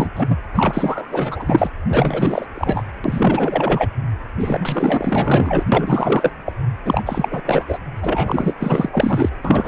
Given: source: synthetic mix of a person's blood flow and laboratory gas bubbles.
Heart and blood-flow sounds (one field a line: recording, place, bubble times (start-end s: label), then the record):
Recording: Doppler ultrasound of blood flow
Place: precordium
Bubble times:
0.00-0.09 s: bubbles
0.14-0.38 s: bubbles
0.55-1.70 s: bubbles
1.89-2.46 s: bubbles
2.54-2.84 s: bubbles
3.04-3.86 s: bubbles
4.36-5.64 s: bubbles
5.71-6.31 s: bubbles
6.46-6.53 s: bubbles
6.85-7.03 s: bubbles
7.06-7.42 s: bubbles
7.45-7.65 s: bubbles
7.68-7.79 s: bubbles
8.01-8.55 s: bubbles
8.59-8.90 s: bubbles
8.92-9.29 s: bubbles
9.44-9.68 s: bubbles
From the record:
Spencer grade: 4 (maximum detectable bubble signal sounding continuously throughout systole and diastole of every cardiac period, and overriding the amplitude of the normal cardiac signals)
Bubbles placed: anywhere in the cardiac cycle